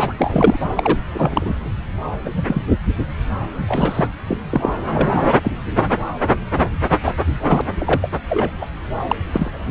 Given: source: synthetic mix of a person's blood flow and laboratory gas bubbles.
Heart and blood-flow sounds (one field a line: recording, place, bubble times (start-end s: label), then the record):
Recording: Doppler ultrasound of blood flow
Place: subclavian vein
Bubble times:
0.00-0.13 s: bubbles
0.18-0.58 s: bubbles
0.76-0.98 s: bubbles
1.14-1.69 s: bubbles
2.25-2.29 s: bubbles
2.36-2.42 s: bubbles
2.46-2.62 s: bubbles
3.54-3.63 s: bubbles
3.68-4.08 s: bubbles
4.27-4.38 s: bubbles
4.50-4.74 s: bubbles
4.95-5.33 s: bubbles
5.44-5.52 s: bubbles
7.05-7.14 s: bubbles
7.44-7.62 s: bubbles
7.78-8.10 s: bubbles
8.29-8.51 s: bubbles
8.61-8.66 s: bubbles
9.08-9.16 s: bubbles
9.32-9.71 s: bubbles
From the record:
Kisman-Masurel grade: 243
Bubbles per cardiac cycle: several, 3 to 8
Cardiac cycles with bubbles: 100%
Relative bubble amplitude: loud (0.450 to 0.775)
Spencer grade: 3 (all of the cardiac periods contain showers or single bubble signals, but not dominating or overriding the cardiac motion signals)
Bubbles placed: anywhere in the cardiac cycle